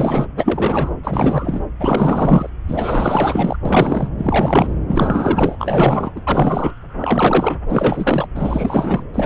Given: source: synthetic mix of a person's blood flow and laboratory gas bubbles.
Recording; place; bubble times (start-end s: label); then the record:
Doppler ultrasound of blood flow; subclavian vein
0.00-0.28 s: bubbles
0.36-0.91 s: bubbles
1.03-1.63 s: bubbles
1.79-2.50 s: bubbles
2.67-3.56 s: bubbles
3.65-4.09 s: bubbles
4.18-4.75 s: bubbles
4.87-5.56 s: bubbles
5.59-6.13 s: bubbles
6.15-6.21 s: bubbles
6.27-6.74 s: bubbles
6.98-7.59 s: bubbles
7.69-8.28 s: bubbles
8.35-9.04 s: bubbles
9.12-9.26 s: bubbles
From the record:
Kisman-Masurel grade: 444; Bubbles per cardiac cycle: continuous sound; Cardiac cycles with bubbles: 100%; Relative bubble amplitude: maximal (0.775 to 0.999); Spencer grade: 4 (maximum detectable bubble signal sounding continuously throughout systole and diastole of every cardiac period, and overriding the amplitude of the normal cardiac signals); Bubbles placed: anywhere in the cardiac cycle